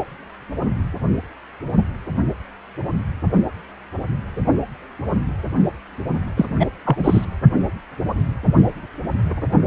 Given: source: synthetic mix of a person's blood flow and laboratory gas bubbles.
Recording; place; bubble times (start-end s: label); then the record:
Doppler ultrasound of blood flow; precordium
6.37-6.46 s: bubbles
6.60-6.67 s: bubbles
6.85-7.25 s: bubbles
From the record:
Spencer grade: 1 (occasional bubble signal discernible with the cardiac motion signal, with majority of cardiac periods free of bubbles); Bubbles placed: anywhere in the cardiac cycle